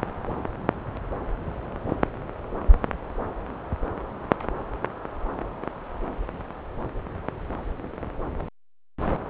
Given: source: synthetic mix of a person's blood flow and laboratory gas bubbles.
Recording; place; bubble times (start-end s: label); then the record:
Doppler ultrasound of blood flow; subclavian vein
no bubbles
From the record:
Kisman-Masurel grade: 000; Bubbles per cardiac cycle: 0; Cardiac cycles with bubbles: 0%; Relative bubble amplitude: no bubbles discernible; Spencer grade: 0 (complete lack of bubble signals)